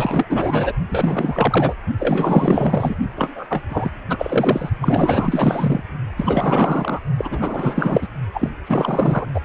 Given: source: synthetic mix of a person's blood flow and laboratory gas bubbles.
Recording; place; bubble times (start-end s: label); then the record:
Doppler ultrasound of blood flow; precordium
0.00-0.73 s: bubbles
0.89-1.73 s: bubbles
1.99-2.96 s: bubbles
3.16-3.46 s: bubbles
3.49-3.63 s: bubbles
3.69-3.90 s: bubbles
4.09-4.70 s: bubbles
4.82-5.84 s: bubbles
6.17-7.00 s: bubbles
7.17-8.08 s: bubbles
8.34-8.50 s: bubbles
8.67-9.26 s: bubbles
9.34-9.41 s: bubbles
From the record:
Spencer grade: 4 (maximum detectable bubble signal sounding continuously throughout systole and diastole of every cardiac period, and overriding the amplitude of the normal cardiac signals); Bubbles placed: only in the low amplitude regions of the cardiac cycle